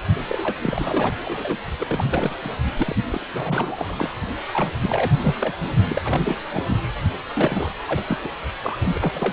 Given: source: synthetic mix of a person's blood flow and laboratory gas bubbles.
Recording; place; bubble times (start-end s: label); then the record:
Doppler ultrasound of blood flow; precordium
0.00-0.02 s: bubbles
0.29-0.55 s: bubbles
0.62-1.12 s: bubbles
1.25-1.57 s: bubbles
1.80-2.36 s: bubbles
2.42-2.51 s: bubbles
2.75-2.96 s: bubbles
3.10-4.10 s: bubbles
4.53-4.69 s: bubbles
4.79-5.12 s: bubbles
5.23-5.54 s: bubbles
5.89-6.02 s: bubbles
6.05-6.21 s: bubbles
6.25-6.38 s: bubbles
6.53-6.64 s: bubbles
6.67-6.79 s: bubbles
7.33-7.71 s: bubbles
7.87-8.04 s: bubbles
8.07-8.18 s: bubbles
8.22-8.31 s: bubbles
8.63-9.33 s: bubbles
From the record:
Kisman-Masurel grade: 342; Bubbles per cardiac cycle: rolling drumbeat, 9 or more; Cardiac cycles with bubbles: 100%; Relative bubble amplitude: moderate (0.250 to 0.450); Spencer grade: 3 (all of the cardiac periods contain showers or single bubble signals, but not dominating or overriding the cardiac motion signals); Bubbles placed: only in the low amplitude regions of the cardiac cycle